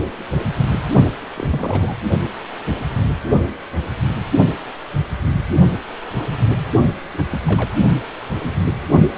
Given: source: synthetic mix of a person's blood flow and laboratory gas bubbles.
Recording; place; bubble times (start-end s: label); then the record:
Doppler ultrasound of blood flow; precordium
1.36-1.97 s: bubbles
7.12-7.25 s: bubbles
7.31-7.38 s: bubbles
7.46-7.73 s: bubbles
From the record:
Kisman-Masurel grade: 221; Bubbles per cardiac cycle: several, 3 to 8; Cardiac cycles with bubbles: 10 to 50%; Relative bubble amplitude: barely perceptible (0.100 to 0.250); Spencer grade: 2 (many but less than half of the cardiac periods contain bubble signals, singularly or in groups); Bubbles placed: only in the low amplitude regions of the cardiac cycle